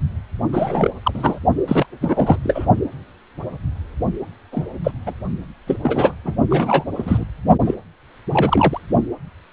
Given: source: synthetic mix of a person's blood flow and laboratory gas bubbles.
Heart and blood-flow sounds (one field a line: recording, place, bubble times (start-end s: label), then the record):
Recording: Doppler ultrasound of blood flow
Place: precordium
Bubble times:
0.52-0.91 s: bubbles
1.02-1.11 s: bubbles
1.15-1.39 s: bubbles
1.68-1.86 s: bubbles
2.01-2.39 s: bubbles
2.43-2.65 s: bubbles
4.52-4.67 s: bubbles
4.83-4.91 s: bubbles
5.05-5.14 s: bubbles
5.67-5.78 s: bubbles
5.82-6.14 s: bubbles
6.24-6.35 s: bubbles
6.50-6.84 s: bubbles
6.95-7.24 s: bubbles
7.64-7.74 s: bubbles
8.30-8.80 s: bubbles
From the record:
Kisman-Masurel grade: 233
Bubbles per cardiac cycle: several, 3 to 8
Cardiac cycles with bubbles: 50 to 99%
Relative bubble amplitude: loud (0.450 to 0.775)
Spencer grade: 3 (all of the cardiac periods contain showers or single bubble signals, but not dominating or overriding the cardiac motion signals)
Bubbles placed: only in the low amplitude regions of the cardiac cycle